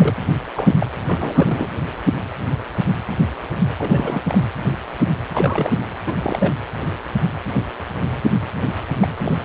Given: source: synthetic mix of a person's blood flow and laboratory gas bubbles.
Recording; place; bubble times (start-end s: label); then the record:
Doppler ultrasound of blood flow; precordium
0.00-0.14 s: bubbles
0.55-0.86 s: bubbles
1.06-1.69 s: bubbles
3.78-4.21 s: bubbles
4.29-4.36 s: bubbles
5.33-5.73 s: bubbles
6.06-6.16 s: bubbles
6.22-6.53 s: bubbles
9.00-9.08 s: bubbles
9.16-9.39 s: bubbles
From the record:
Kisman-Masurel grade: 222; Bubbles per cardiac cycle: several, 3 to 8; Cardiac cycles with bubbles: 10 to 50%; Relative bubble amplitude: moderate (0.250 to 0.450); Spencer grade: 2 (many but less than half of the cardiac periods contain bubble signals, singularly or in groups); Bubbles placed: anywhere in the cardiac cycle